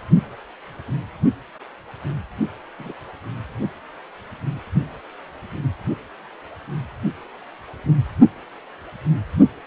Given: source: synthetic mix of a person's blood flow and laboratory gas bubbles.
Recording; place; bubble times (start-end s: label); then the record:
Doppler ultrasound of blood flow; precordium
2.79-2.92 s: bubbles
From the record:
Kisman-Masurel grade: 111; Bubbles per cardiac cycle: 1 to 2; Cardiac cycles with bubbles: 1 to 10%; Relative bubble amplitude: barely perceptible (0.100 to 0.250); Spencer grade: 1 (occasional bubble signal discernible with the cardiac motion signal, with majority of cardiac periods free of bubbles); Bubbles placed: only in the low amplitude regions of the cardiac cycle